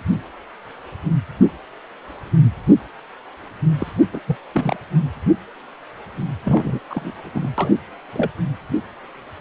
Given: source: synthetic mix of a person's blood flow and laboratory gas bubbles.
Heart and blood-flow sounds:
Doppler ultrasound of blood flow; precordium
3.80-3.87 s: bubbles
4.12-4.20 s: bubbles
4.27-4.36 s: bubbles
4.52-4.76 s: bubbles
6.44-6.80 s: bubbles
6.90-7.31 s: bubbles
7.34-7.50 s: bubbles
7.58-7.71 s: bubbles
8.12-8.30 s: bubbles
From the record:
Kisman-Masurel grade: 222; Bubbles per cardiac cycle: several, 3 to 8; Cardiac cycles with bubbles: 10 to 50%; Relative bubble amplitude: moderate (0.250 to 0.450); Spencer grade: 2 (many but less than half of the cardiac periods contain bubble signals, singularly or in groups); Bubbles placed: anywhere in the cardiac cycle

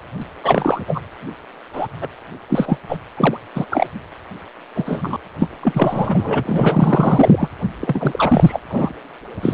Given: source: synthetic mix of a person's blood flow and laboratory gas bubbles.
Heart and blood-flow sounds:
Doppler ultrasound of blood flow; precordium
0.43-0.81 s: bubbles
0.88-1.02 s: bubbles
1.73-1.87 s: bubbles
2.01-2.08 s: bubbles
2.49-2.77 s: bubbles
2.88-2.97 s: bubbles
3.17-3.37 s: bubbles
3.55-3.66 s: bubbles
3.70-3.87 s: bubbles
4.75-5.17 s: bubbles
5.40-5.49 s: bubbles
5.62-7.49 s: bubbles
7.79-8.60 s: bubbles
8.70-8.94 s: bubbles
9.42-9.54 s: bubbles
From the record:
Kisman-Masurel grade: 343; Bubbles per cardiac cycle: rolling drumbeat, 9 or more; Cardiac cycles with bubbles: 100%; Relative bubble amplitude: loud (0.450 to 0.775); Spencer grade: 3 (all of the cardiac periods contain showers or single bubble signals, but not dominating or overriding the cardiac motion signals); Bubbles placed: anywhere in the cardiac cycle

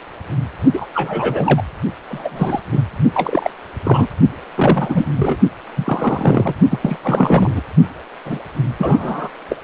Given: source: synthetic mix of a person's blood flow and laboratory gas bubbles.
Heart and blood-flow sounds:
Doppler ultrasound of blood flow; precordium
0.73-0.87 s: bubbles
0.94-1.63 s: bubbles
2.08-2.60 s: bubbles
2.71-2.81 s: bubbles
3.14-3.50 s: bubbles
3.83-4.07 s: bubbles
4.56-5.06 s: bubbles
5.16-5.36 s: bubbles
5.77-6.54 s: bubbles
6.70-6.97 s: bubbles
7.03-7.62 s: bubbles
8.26-8.39 s: bubbles
8.78-9.29 s: bubbles
9.49-9.57 s: bubbles
From the record:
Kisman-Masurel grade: 233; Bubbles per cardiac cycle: several, 3 to 8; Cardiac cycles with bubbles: 50 to 99%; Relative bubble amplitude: loud (0.450 to 0.775); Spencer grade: 3 (all of the cardiac periods contain showers or single bubble signals, but not dominating or overriding the cardiac motion signals); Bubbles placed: only in the low amplitude regions of the cardiac cycle

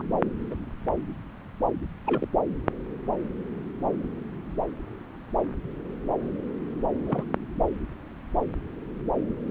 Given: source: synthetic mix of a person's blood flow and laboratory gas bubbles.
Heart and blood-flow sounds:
Doppler ultrasound of blood flow; subclavian vein
0.00-0.03 s: bubbles
0.51-0.54 s: bubbles
2.04-2.28 s: bubbles
7.06-7.23 s: bubbles
7.27-7.29 s: bubbles
From the record:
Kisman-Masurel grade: 121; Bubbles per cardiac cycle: 1 to 2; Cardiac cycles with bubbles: 10 to 50%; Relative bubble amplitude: barely perceptible (0.100 to 0.250); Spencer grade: 2 (many but less than half of the cardiac periods contain bubble signals, singularly or in groups); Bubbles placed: anywhere in the cardiac cycle

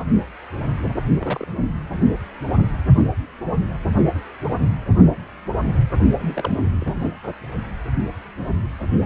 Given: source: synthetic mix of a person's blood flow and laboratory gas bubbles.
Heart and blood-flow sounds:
Doppler ultrasound of blood flow; precordium
0.00-0.03 s: bubbles
0.84-0.94 s: bubbles
1.15-1.45 s: bubbles
6.13-6.58 s: bubbles
6.80-7.11 s: bubbles
From the record:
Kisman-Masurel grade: 221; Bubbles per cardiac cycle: several, 3 to 8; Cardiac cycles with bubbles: 10 to 50%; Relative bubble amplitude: barely perceptible (0.100 to 0.250); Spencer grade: 2 (many but less than half of the cardiac periods contain bubble signals, singularly or in groups); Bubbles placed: only in the low amplitude regions of the cardiac cycle

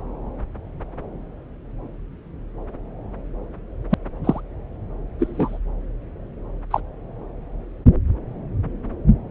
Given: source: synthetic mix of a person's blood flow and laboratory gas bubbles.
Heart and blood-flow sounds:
Doppler ultrasound of blood flow; subclavian vein
3.89-3.94 s: bubbles
4.24-4.40 s: bubbles
5.19-5.59 s: bubbles
6.71-6.80 s: bubbles
From the record:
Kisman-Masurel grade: 123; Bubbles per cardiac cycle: 1 to 2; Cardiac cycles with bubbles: 10 to 50%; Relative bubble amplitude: loud (0.450 to 0.775); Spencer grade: 2 (many but less than half of the cardiac periods contain bubble signals, singularly or in groups); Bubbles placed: anywhere in the cardiac cycle

